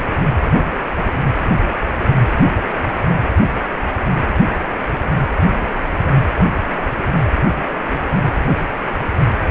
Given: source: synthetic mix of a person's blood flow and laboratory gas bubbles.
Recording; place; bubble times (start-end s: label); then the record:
Doppler ultrasound of blood flow; precordium
no bubbles
From the record:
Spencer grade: 0 (complete lack of bubble signals)